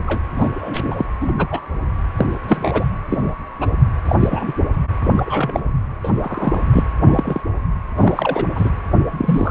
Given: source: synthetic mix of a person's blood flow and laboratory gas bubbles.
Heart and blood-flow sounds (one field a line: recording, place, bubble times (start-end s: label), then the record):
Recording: Doppler ultrasound of blood flow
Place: precordium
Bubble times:
0.07-0.21 s: bubbles
0.38-0.50 s: bubbles
0.54-1.06 s: bubbles
1.21-1.32 s: bubbles
1.38-1.46 s: bubbles
1.51-1.60 s: bubbles
2.17-2.26 s: bubbles
2.48-2.85 s: bubbles
3.09-3.30 s: bubbles
3.60-3.68 s: bubbles
4.05-4.16 s: bubbles
4.20-4.54 s: bubbles
5.02-5.11 s: bubbles
5.17-5.71 s: bubbles
6.03-6.11 s: bubbles
6.20-6.62 s: bubbles
6.72-6.85 s: bubbles
7.07-7.41 s: bubbles
7.97-8.45 s: bubbles
8.55-8.71 s: bubbles
8.99-9.05 s: bubbles
9.11-9.51 s: bubbles
From the record:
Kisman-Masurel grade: 242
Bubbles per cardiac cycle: several, 3 to 8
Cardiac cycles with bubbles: 100%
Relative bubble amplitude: moderate (0.250 to 0.450)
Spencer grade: 3 (all of the cardiac periods contain showers or single bubble signals, but not dominating or overriding the cardiac motion signals)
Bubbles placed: anywhere in the cardiac cycle